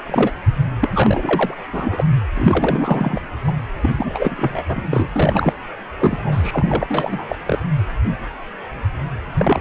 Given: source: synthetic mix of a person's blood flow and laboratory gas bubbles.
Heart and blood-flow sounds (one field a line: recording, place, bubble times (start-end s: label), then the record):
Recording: Doppler ultrasound of blood flow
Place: precordium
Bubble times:
0.06-0.31 s: bubbles
0.81-1.54 s: bubbles
1.72-2.04 s: bubbles
2.34-3.21 s: bubbles
3.44-3.53 s: bubbles
3.82-3.89 s: bubbles
3.98-4.63 s: bubbles
4.69-4.88 s: bubbles
4.91-5.54 s: bubbles
6.00-7.37 s: bubbles
7.46-7.59 s: bubbles
9.38-9.61 s: bubbles
From the record:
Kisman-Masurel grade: 333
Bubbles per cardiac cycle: rolling drumbeat, 9 or more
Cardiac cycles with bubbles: 50 to 99%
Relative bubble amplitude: loud (0.450 to 0.775)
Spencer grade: 3 (all of the cardiac periods contain showers or single bubble signals, but not dominating or overriding the cardiac motion signals)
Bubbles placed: anywhere in the cardiac cycle